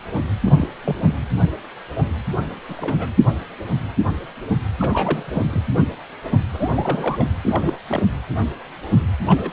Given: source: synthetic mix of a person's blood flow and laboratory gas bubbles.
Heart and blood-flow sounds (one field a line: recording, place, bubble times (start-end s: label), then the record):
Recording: Doppler ultrasound of blood flow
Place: precordium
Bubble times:
0.43-0.69 s: bubbles
0.84-1.15 s: bubbles
2.68-3.08 s: bubbles
4.79-5.23 s: bubbles
5.26-5.62 s: bubbles
6.53-7.28 s: bubbles
7.42-7.79 s: bubbles
7.88-8.03 s: bubbles
9.27-9.51 s: bubbles
From the record:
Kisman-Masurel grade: 232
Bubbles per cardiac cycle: several, 3 to 8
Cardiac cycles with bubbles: 50 to 99%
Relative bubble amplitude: moderate (0.250 to 0.450)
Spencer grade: 3 (all of the cardiac periods contain showers or single bubble signals, but not dominating or overriding the cardiac motion signals)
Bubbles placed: anywhere in the cardiac cycle